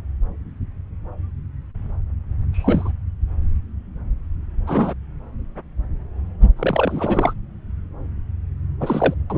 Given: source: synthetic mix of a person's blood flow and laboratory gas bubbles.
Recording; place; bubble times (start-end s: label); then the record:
Doppler ultrasound of blood flow; subclavian vein
2.53-2.92 s: bubbles
4.67-4.93 s: bubbles
6.56-7.33 s: bubbles
8.80-9.14 s: bubbles
9.29-9.38 s: bubbles
From the record:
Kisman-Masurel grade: 222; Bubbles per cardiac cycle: several, 3 to 8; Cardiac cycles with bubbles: 10 to 50%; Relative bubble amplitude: moderate (0.250 to 0.450); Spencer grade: 2 (many but less than half of the cardiac periods contain bubble signals, singularly or in groups); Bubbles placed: anywhere in the cardiac cycle